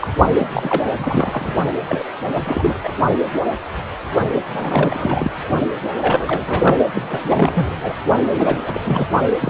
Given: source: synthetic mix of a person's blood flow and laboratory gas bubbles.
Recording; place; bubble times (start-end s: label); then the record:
Doppler ultrasound of blood flow; precordium
0.00-0.08 s: bubbles
0.38-0.46 s: bubbles
0.49-0.87 s: bubbles
0.96-1.54 s: bubbles
1.89-2.04 s: bubbles
2.35-2.77 s: bubbles
2.83-2.93 s: bubbles
4.52-5.32 s: bubbles
6.00-6.43 s: bubbles
6.46-6.77 s: bubbles
6.95-7.19 s: bubbles
7.23-7.68 s: bubbles
7.82-7.93 s: bubbles
8.38-9.09 s: bubbles
9.39-9.50 s: bubbles
From the record:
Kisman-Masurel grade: 332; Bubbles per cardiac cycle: rolling drumbeat, 9 or more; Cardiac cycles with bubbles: 50 to 99%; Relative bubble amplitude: moderate (0.250 to 0.450); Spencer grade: 3 (all of the cardiac periods contain showers or single bubble signals, but not dominating or overriding the cardiac motion signals); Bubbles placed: only in the low amplitude regions of the cardiac cycle